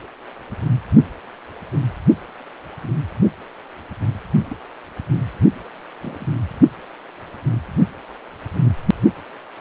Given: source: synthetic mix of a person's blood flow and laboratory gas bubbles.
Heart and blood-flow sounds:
Doppler ultrasound of blood flow; precordium
2.81-2.96 s: bubbles
4.50-4.54 s: bubbles
6.01-6.26 s: bubbles
From the record:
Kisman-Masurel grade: 121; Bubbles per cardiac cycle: 1 to 2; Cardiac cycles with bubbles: 10 to 50%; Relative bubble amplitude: barely perceptible (0.100 to 0.250); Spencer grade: 2 (many but less than half of the cardiac periods contain bubble signals, singularly or in groups); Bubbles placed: only in the low amplitude regions of the cardiac cycle

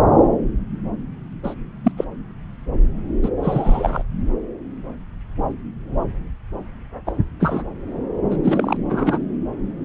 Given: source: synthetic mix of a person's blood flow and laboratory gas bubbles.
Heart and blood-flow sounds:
Doppler ultrasound of blood flow; subclavian vein
1.43-1.54 s: bubbles
1.84-1.92 s: bubbles
1.97-2.05 s: bubbles
3.22-3.30 s: bubbles
3.43-4.03 s: bubbles
7.06-7.12 s: bubbles
7.40-7.63 s: bubbles
8.30-8.37 s: bubbles
8.43-8.76 s: bubbles
8.89-9.18 s: bubbles
From the record:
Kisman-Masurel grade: 223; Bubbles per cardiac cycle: several, 3 to 8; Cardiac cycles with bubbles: 10 to 50%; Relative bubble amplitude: loud (0.450 to 0.775); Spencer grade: 2 (many but less than half of the cardiac periods contain bubble signals, singularly or in groups); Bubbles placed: anywhere in the cardiac cycle

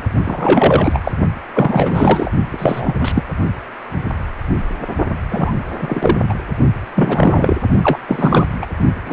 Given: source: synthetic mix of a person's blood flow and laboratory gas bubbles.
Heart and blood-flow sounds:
Doppler ultrasound of blood flow; precordium
0.24-1.01 s: bubbles
1.03-1.11 s: bubbles
1.53-2.31 s: bubbles
2.53-2.95 s: bubbles
3.00-3.12 s: bubbles
3.15-3.23 s: bubbles
5.31-5.54 s: bubbles
5.82-6.21 s: bubbles
6.29-6.34 s: bubbles
6.95-7.57 s: bubbles
7.83-7.98 s: bubbles
8.08-8.47 s: bubbles
8.61-8.66 s: bubbles
9.05-9.13 s: bubbles
From the record:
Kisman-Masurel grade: 333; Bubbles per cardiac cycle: rolling drumbeat, 9 or more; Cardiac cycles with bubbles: 50 to 99%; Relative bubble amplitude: loud (0.450 to 0.775); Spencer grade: 3 (all of the cardiac periods contain showers or single bubble signals, but not dominating or overriding the cardiac motion signals); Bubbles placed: only in the low amplitude regions of the cardiac cycle

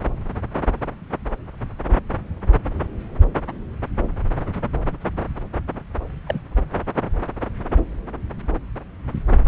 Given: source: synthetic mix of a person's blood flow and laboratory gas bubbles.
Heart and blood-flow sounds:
Doppler ultrasound of blood flow; subclavian vein
6.26-6.41 s: bubbles
From the record:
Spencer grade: 1 (occasional bubble signal discernible with the cardiac motion signal, with majority of cardiac periods free of bubbles); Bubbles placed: anywhere in the cardiac cycle

